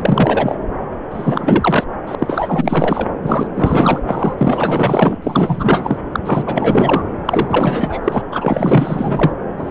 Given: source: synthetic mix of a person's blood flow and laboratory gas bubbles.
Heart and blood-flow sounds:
Doppler ultrasound of blood flow; subclavian vein
0.00-0.55 s: bubbles
1.10-1.86 s: bubbles
2.06-2.15 s: bubbles
2.18-3.07 s: bubbles
3.22-3.47 s: bubbles
3.54-4.00 s: bubbles
4.06-4.34 s: bubbles
4.38-5.16 s: bubbles
5.22-5.98 s: bubbles
6.12-6.19 s: bubbles
6.25-7.03 s: bubbles
7.26-8.01 s: bubbles
8.04-8.24 s: bubbles
8.32-9.32 s: bubbles
9.57-9.71 s: bubbles
From the record:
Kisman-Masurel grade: 444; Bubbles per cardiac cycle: continuous sound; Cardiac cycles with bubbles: 100%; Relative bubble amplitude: maximal (0.775 to 0.999); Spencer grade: 4 (maximum detectable bubble signal sounding continuously throughout systole and diastole of every cardiac period, and overriding the amplitude of the normal cardiac signals); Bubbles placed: anywhere in the cardiac cycle

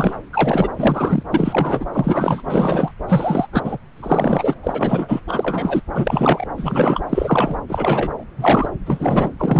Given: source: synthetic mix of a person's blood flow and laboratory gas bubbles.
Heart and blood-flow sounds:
Doppler ultrasound of blood flow; subclavian vein
0.00-0.16 s: bubbles
0.33-0.68 s: bubbles
0.76-1.23 s: bubbles
1.31-1.86 s: bubbles
1.92-2.42 s: bubbles
2.44-2.92 s: bubbles
3.08-3.46 s: bubbles
3.52-3.77 s: bubbles
3.97-4.54 s: bubbles
4.63-5.21 s: bubbles
5.28-5.81 s: bubbles
5.94-6.46 s: bubbles
6.57-7.01 s: bubbles
7.09-7.56 s: bubbles
7.69-8.24 s: bubbles
8.38-8.69 s: bubbles
8.86-9.30 s: bubbles
9.39-9.60 s: bubbles
From the record:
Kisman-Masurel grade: 343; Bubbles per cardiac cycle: rolling drumbeat, 9 or more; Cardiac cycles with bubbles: 100%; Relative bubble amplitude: loud (0.450 to 0.775); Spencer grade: 3 (all of the cardiac periods contain showers or single bubble signals, but not dominating or overriding the cardiac motion signals); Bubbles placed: anywhere in the cardiac cycle

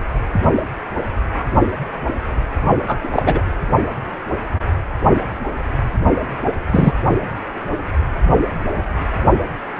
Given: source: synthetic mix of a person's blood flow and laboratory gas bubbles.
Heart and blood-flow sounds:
Doppler ultrasound of blood flow; precordium
2.87-2.97 s: bubbles
3.03-3.08 s: bubbles
3.12-3.23 s: bubbles
3.25-3.41 s: bubbles
6.71-6.93 s: bubbles
7.08-7.15 s: bubbles
From the record:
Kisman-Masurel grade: 223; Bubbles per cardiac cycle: several, 3 to 8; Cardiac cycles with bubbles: 10 to 50%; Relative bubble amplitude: loud (0.450 to 0.775); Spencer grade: 2 (many but less than half of the cardiac periods contain bubble signals, singularly or in groups); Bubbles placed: only in the low amplitude regions of the cardiac cycle

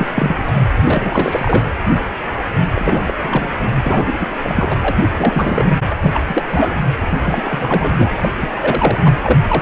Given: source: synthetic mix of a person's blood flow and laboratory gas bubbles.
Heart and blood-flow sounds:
Doppler ultrasound of blood flow; precordium
0.00-0.06 s: bubbles
0.15-0.44 s: bubbles
0.47-0.61 s: bubbles
0.83-1.64 s: bubbles
2.74-3.14 s: bubbles
3.21-3.52 s: bubbles
3.73-4.14 s: bubbles
4.19-4.28 s: bubbles
4.44-4.78 s: bubbles
4.81-4.96 s: bubbles
5.17-5.75 s: bubbles
5.90-5.96 s: bubbles
6.01-6.21 s: bubbles
6.27-6.75 s: bubbles
7.10-8.12 s: bubbles
8.21-8.29 s: bubbles
8.38-8.51 s: bubbles
8.54-9.15 s: bubbles
9.23-9.38 s: bubbles
9.48-9.62 s: bubbles
From the record:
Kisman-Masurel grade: 333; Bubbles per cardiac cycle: rolling drumbeat, 9 or more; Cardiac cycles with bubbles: 50 to 99%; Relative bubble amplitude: loud (0.450 to 0.775); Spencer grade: 3 (all of the cardiac periods contain showers or single bubble signals, but not dominating or overriding the cardiac motion signals); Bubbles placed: anywhere in the cardiac cycle

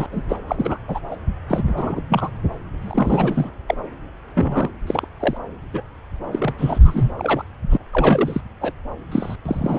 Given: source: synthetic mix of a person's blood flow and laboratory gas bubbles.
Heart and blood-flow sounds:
Doppler ultrasound of blood flow; subclavian vein
0.00-0.07 s: bubbles
0.11-0.24 s: bubbles
0.29-0.36 s: bubbles
0.48-0.78 s: bubbles
0.88-0.99 s: bubbles
1.10-1.15 s: bubbles
1.48-2.01 s: bubbles
2.09-2.29 s: bubbles
2.81-3.51 s: bubbles
3.67-3.75 s: bubbles
4.35-4.71 s: bubbles
4.87-5.06 s: bubbles
5.20-5.37 s: bubbles
5.73-5.83 s: bubbles
6.32-6.54 s: bubbles
6.58-7.12 s: bubbles
7.18-7.45 s: bubbles
7.70-7.77 s: bubbles
7.93-8.41 s: bubbles
8.61-8.73 s: bubbles
9.12-9.36 s: bubbles
9.46-9.79 s: bubbles
From the record:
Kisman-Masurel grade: 332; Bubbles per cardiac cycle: rolling drumbeat, 9 or more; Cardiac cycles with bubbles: 50 to 99%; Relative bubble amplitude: moderate (0.250 to 0.450); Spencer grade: 3 (all of the cardiac periods contain showers or single bubble signals, but not dominating or overriding the cardiac motion signals); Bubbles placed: anywhere in the cardiac cycle

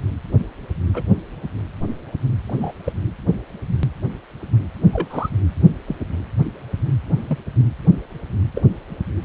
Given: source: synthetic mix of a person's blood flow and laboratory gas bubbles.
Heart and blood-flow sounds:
Doppler ultrasound of blood flow; precordium
0.93-1.02 s: bubbles
2.47-2.72 s: bubbles
2.84-2.93 s: bubbles
4.93-5.08 s: bubbles
5.10-5.29 s: bubbles
5.87-5.95 s: bubbles
7.27-7.38 s: bubbles
8.55-8.62 s: bubbles
From the record:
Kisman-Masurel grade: 122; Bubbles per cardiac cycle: 1 to 2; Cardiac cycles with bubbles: 10 to 50%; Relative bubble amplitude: moderate (0.250 to 0.450); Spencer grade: 2 (many but less than half of the cardiac periods contain bubble signals, singularly or in groups); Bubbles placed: anywhere in the cardiac cycle

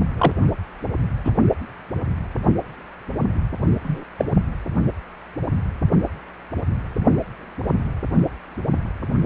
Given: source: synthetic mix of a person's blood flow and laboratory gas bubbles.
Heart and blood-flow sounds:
Doppler ultrasound of blood flow; precordium
0.17-0.32 s: bubbles
1.24-1.31 s: bubbles
3.83-4.04 s: bubbles
4.18-4.25 s: bubbles
From the record:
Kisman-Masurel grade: 123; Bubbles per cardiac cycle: 1 to 2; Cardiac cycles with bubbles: 10 to 50%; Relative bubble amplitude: loud (0.450 to 0.775); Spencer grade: 2 (many but less than half of the cardiac periods contain bubble signals, singularly or in groups); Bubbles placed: only in the low amplitude regions of the cardiac cycle

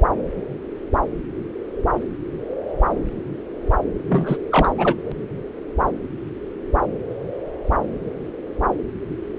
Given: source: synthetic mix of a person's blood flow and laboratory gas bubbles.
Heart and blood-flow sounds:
Doppler ultrasound of blood flow; subclavian vein
4.06-4.38 s: bubbles
4.51-4.74 s: bubbles
4.77-4.95 s: bubbles
From the record:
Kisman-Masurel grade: 212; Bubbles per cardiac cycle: several, 3 to 8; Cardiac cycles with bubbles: 1 to 10%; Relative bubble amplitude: moderate (0.250 to 0.450); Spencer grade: 1 (occasional bubble signal discernible with the cardiac motion signal, with majority of cardiac periods free of bubbles); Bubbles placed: anywhere in the cardiac cycle

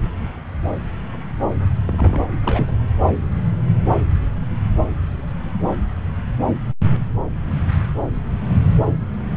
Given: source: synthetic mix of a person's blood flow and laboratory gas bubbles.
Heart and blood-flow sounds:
Doppler ultrasound of blood flow; subclavian vein
1.86-2.20 s: bubbles
2.42-2.71 s: bubbles
From the record:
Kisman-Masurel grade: 211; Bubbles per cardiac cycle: several, 3 to 8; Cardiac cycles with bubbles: 1 to 10%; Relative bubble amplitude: barely perceptible (0.100 to 0.250); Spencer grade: 1 (occasional bubble signal discernible with the cardiac motion signal, with majority of cardiac periods free of bubbles); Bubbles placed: anywhere in the cardiac cycle

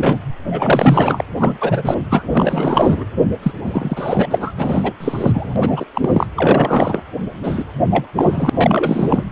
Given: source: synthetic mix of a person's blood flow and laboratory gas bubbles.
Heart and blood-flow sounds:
Doppler ultrasound of blood flow; precordium
0.00-0.17 s: bubbles
0.47-1.25 s: bubbles
1.40-1.57 s: bubbles
1.61-1.99 s: bubbles
2.09-2.22 s: bubbles
2.30-3.04 s: bubbles
3.42-3.52 s: bubbles
3.64-4.52 s: bubbles
4.57-4.94 s: bubbles
5.00-5.53 s: bubbles
5.56-5.85 s: bubbles
5.95-6.27 s: bubbles
6.36-7.02 s: bubbles
7.43-7.64 s: bubbles
7.91-8.06 s: bubbles
8.16-9.24 s: bubbles
From the record:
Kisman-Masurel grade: 333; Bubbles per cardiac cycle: rolling drumbeat, 9 or more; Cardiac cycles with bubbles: 50 to 99%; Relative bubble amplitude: loud (0.450 to 0.775); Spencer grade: 3 (all of the cardiac periods contain showers or single bubble signals, but not dominating or overriding the cardiac motion signals); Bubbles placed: anywhere in the cardiac cycle

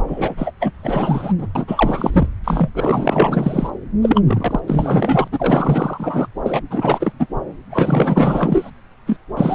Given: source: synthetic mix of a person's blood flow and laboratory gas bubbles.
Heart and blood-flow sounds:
Doppler ultrasound of blood flow; subclavian vein
0.07-0.35 s: bubbles
0.37-0.52 s: bubbles
0.59-0.72 s: bubbles
0.83-1.32 s: bubbles
1.38-1.47 s: bubbles
1.55-1.65 s: bubbles
1.68-2.28 s: bubbles
2.44-2.68 s: bubbles
2.75-3.71 s: bubbles
4.02-4.22 s: bubbles
4.26-4.60 s: bubbles
4.67-5.28 s: bubbles
5.31-6.27 s: bubbles
6.45-6.60 s: bubbles
6.70-7.12 s: bubbles
7.19-7.26 s: bubbles
7.70-8.71 s: bubbles
9.06-9.19 s: bubbles
9.37-9.55 s: bubbles
From the record:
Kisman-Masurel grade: 444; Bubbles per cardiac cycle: continuous sound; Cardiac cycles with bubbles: 100%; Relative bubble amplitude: maximal (0.775 to 0.999); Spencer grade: 4 (maximum detectable bubble signal sounding continuously throughout systole and diastole of every cardiac period, and overriding the amplitude of the normal cardiac signals); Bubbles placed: anywhere in the cardiac cycle

